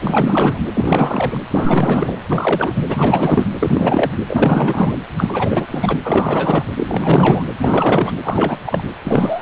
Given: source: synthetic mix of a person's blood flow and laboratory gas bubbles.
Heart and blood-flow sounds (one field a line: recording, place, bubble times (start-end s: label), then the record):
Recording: Doppler ultrasound of blood flow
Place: precordium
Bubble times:
0.00-0.62 s: bubbles
0.75-1.39 s: bubbles
1.51-2.21 s: bubbles
2.29-2.83 s: bubbles
2.88-3.46 s: bubbles
3.60-4.18 s: bubbles
4.27-4.93 s: bubbles
5.16-5.67 s: bubbles
5.71-5.98 s: bubbles
6.04-6.64 s: bubbles
6.73-7.43 s: bubbles
7.58-8.12 s: bubbles
8.22-8.60 s: bubbles
8.66-8.83 s: bubbles
9.04-9.42 s: bubbles
From the record:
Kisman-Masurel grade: 444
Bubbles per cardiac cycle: continuous sound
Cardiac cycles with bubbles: 100%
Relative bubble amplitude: maximal (0.775 to 0.999)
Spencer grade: 4 (maximum detectable bubble signal sounding continuously throughout systole and diastole of every cardiac period, and overriding the amplitude of the normal cardiac signals)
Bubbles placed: anywhere in the cardiac cycle